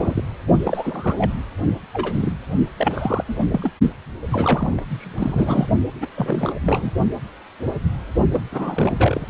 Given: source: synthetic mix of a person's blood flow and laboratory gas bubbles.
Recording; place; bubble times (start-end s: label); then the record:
Doppler ultrasound of blood flow; precordium
0.00-0.22 s: bubbles
0.65-1.15 s: bubbles
1.18-1.32 s: bubbles
1.93-2.35 s: bubbles
2.77-3.24 s: bubbles
3.27-3.47 s: bubbles
3.50-3.71 s: bubbles
4.32-4.82 s: bubbles
4.90-5.68 s: bubbles
6.00-6.08 s: bubbles
6.17-6.54 s: bubbles
6.66-6.91 s: bubbles
8.32-8.46 s: bubbles
8.51-9.27 s: bubbles
From the record:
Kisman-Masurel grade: 332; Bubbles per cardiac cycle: rolling drumbeat, 9 or more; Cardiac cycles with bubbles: 50 to 99%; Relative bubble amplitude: moderate (0.250 to 0.450); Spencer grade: 3 (all of the cardiac periods contain showers or single bubble signals, but not dominating or overriding the cardiac motion signals); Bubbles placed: only in the low amplitude regions of the cardiac cycle